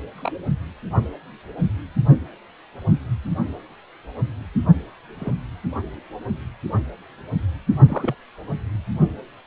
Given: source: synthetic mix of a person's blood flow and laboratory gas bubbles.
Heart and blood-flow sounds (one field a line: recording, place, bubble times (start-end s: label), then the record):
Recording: Doppler ultrasound of blood flow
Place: precordium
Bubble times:
0.15-0.45 s: bubbles
5.15-5.34 s: bubbles
7.88-8.15 s: bubbles
From the record:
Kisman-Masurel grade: 121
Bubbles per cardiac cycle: 1 to 2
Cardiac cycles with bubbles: 10 to 50%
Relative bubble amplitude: barely perceptible (0.100 to 0.250)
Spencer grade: 2 (many but less than half of the cardiac periods contain bubble signals, singularly or in groups)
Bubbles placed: only in the low amplitude regions of the cardiac cycle